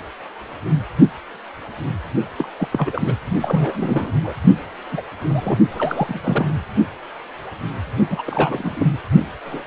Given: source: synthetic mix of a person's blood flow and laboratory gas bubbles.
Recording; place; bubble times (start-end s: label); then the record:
Doppler ultrasound of blood flow; precordium
2.38-2.48 s: bubbles
2.57-2.68 s: bubbles
2.72-3.15 s: bubbles
3.42-4.12 s: bubbles
4.24-4.34 s: bubbles
4.92-5.03 s: bubbles
5.29-5.59 s: bubbles
5.71-6.20 s: bubbles
6.23-6.52 s: bubbles
8.10-8.22 s: bubbles
8.26-8.91 s: bubbles
9.45-9.63 s: bubbles
From the record:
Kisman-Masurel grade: 332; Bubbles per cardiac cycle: rolling drumbeat, 9 or more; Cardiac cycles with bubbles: 50 to 99%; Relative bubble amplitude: moderate (0.250 to 0.450); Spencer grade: 3 (all of the cardiac periods contain showers or single bubble signals, but not dominating or overriding the cardiac motion signals); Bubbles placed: only in the low amplitude regions of the cardiac cycle